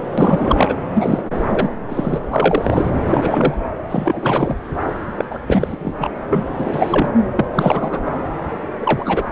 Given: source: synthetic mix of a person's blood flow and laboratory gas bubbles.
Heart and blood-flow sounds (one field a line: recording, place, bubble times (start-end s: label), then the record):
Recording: Doppler ultrasound of blood flow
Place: subclavian vein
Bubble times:
0.18-0.75 s: bubbles
0.94-1.23 s: bubbles
1.49-1.69 s: bubbles
1.89-2.21 s: bubbles
2.29-2.92 s: bubbles
3.08-3.54 s: bubbles
3.90-4.61 s: bubbles
5.17-5.24 s: bubbles
5.30-5.39 s: bubbles
5.46-5.76 s: bubbles
5.80-5.95 s: bubbles
5.99-6.10 s: bubbles
6.29-6.45 s: bubbles
6.59-7.12 s: bubbles
7.36-7.45 s: bubbles
7.53-8.01 s: bubbles
8.05-8.26 s: bubbles
8.80-9.23 s: bubbles
From the record:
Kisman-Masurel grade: 343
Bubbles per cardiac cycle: rolling drumbeat, 9 or more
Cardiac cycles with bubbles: 100%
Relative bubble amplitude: loud (0.450 to 0.775)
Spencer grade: 3 (all of the cardiac periods contain showers or single bubble signals, but not dominating or overriding the cardiac motion signals)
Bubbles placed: anywhere in the cardiac cycle